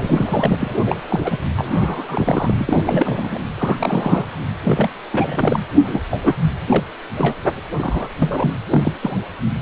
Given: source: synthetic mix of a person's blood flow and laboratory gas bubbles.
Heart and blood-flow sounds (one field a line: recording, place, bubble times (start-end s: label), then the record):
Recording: Doppler ultrasound of blood flow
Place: precordium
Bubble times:
0.01-0.55 s: bubbles
0.59-0.76 s: bubbles
0.84-1.02 s: bubbles
1.09-1.38 s: bubbles
1.56-2.54 s: bubbles
2.58-2.77 s: bubbles
2.84-3.39 s: bubbles
3.58-4.28 s: bubbles
4.64-4.90 s: bubbles
5.12-5.60 s: bubbles
5.75-6.00 s: bubbles
6.11-6.19 s: bubbles
6.23-6.35 s: bubbles
6.66-6.83 s: bubbles
7.15-7.36 s: bubbles
7.77-8.09 s: bubbles
8.19-8.51 s: bubbles
8.71-8.93 s: bubbles
9.02-9.17 s: bubbles
From the record:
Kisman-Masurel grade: 242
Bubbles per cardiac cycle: several, 3 to 8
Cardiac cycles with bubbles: 100%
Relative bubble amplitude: moderate (0.250 to 0.450)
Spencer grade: 3 (all of the cardiac periods contain showers or single bubble signals, but not dominating or overriding the cardiac motion signals)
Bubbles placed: anywhere in the cardiac cycle